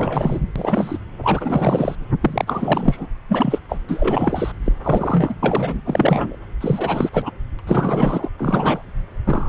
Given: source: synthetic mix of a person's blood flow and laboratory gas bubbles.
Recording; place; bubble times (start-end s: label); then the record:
Doppler ultrasound of blood flow; subclavian vein
0.00-0.40 s: bubbles
0.55-0.98 s: bubbles
1.22-1.95 s: bubbles
2.20-3.05 s: bubbles
3.28-3.58 s: bubbles
3.68-3.77 s: bubbles
3.88-4.52 s: bubbles
4.65-4.72 s: bubbles
4.83-5.34 s: bubbles
5.42-5.81 s: bubbles
5.84-6.38 s: bubbles
6.60-7.09 s: bubbles
7.13-7.31 s: bubbles
7.58-7.63 s: bubbles
7.67-8.29 s: bubbles
8.38-8.89 s: bubbles
9.24-9.49 s: bubbles
From the record:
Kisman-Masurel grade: 343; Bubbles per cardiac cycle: rolling drumbeat, 9 or more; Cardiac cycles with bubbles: 100%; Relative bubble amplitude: loud (0.450 to 0.775); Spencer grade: 3 (all of the cardiac periods contain showers or single bubble signals, but not dominating or overriding the cardiac motion signals); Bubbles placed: anywhere in the cardiac cycle